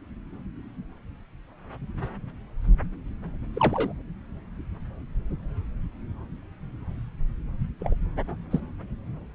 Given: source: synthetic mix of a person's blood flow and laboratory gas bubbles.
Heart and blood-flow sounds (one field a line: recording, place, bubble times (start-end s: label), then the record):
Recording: Doppler ultrasound of blood flow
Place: subclavian vein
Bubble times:
3.54-3.93 s: bubbles
7.80-7.96 s: bubbles
8.50-8.60 s: bubbles
From the record:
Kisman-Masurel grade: 121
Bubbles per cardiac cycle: 1 to 2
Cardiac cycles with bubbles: 10 to 50%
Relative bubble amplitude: barely perceptible (0.100 to 0.250)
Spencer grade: 2 (many but less than half of the cardiac periods contain bubble signals, singularly or in groups)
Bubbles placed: anywhere in the cardiac cycle